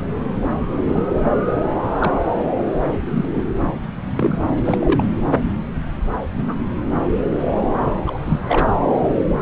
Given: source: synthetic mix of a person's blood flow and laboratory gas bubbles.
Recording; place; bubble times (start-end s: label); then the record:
Doppler ultrasound of blood flow; subclavian vein
0.88-1.04 s: bubbles
2.00-2.12 s: bubbles
3.09-3.25 s: bubbles
3.35-3.42 s: bubbles
4.17-4.38 s: bubbles
4.65-5.05 s: bubbles
6.37-6.55 s: bubbles
8.06-8.18 s: bubbles
8.25-8.40 s: bubbles
8.49-8.67 s: bubbles
From the record:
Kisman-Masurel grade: 122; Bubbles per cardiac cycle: 1 to 2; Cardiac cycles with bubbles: 10 to 50%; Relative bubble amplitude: moderate (0.250 to 0.450); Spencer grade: 2 (many but less than half of the cardiac periods contain bubble signals, singularly or in groups); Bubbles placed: anywhere in the cardiac cycle